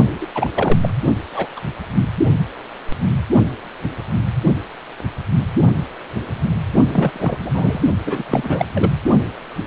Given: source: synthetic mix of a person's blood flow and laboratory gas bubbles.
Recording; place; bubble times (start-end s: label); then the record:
Doppler ultrasound of blood flow; precordium
0.20-0.27 s: bubbles
0.35-0.51 s: bubbles
0.55-0.77 s: bubbles
0.82-0.93 s: bubbles
1.34-1.48 s: bubbles
1.56-1.60 s: bubbles
6.87-7.81 s: bubbles
8.06-8.25 s: bubbles
8.29-8.66 s: bubbles
8.74-8.92 s: bubbles
From the record:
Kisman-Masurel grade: 332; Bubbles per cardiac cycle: rolling drumbeat, 9 or more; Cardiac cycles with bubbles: 50 to 99%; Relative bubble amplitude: moderate (0.250 to 0.450); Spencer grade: 3 (all of the cardiac periods contain showers or single bubble signals, but not dominating or overriding the cardiac motion signals); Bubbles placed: only in the low amplitude regions of the cardiac cycle